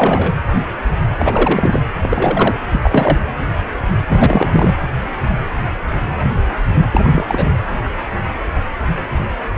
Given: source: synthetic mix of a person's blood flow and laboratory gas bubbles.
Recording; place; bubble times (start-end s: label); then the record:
Doppler ultrasound of blood flow; precordium
0.00-0.35 s: bubbles
1.16-1.84 s: bubbles
2.02-2.54 s: bubbles
2.72-2.80 s: bubbles
2.83-3.19 s: bubbles
4.08-4.76 s: bubbles
6.91-7.51 s: bubbles
From the record:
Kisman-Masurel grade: 333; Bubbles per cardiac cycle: rolling drumbeat, 9 or more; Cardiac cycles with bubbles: 50 to 99%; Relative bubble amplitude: loud (0.450 to 0.775); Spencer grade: 3 (all of the cardiac periods contain showers or single bubble signals, but not dominating or overriding the cardiac motion signals); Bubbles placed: anywhere in the cardiac cycle